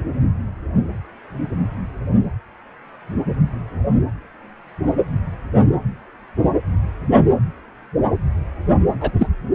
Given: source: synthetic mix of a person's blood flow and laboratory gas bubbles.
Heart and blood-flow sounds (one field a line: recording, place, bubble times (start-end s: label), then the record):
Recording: Doppler ultrasound of blood flow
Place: precordium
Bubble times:
9.00-9.12 s: bubbles
9.18-9.28 s: bubbles
From the record:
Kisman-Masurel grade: 123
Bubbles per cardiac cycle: 1 to 2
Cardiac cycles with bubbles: 10 to 50%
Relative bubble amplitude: loud (0.450 to 0.775)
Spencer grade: 2 (many but less than half of the cardiac periods contain bubble signals, singularly or in groups)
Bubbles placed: anywhere in the cardiac cycle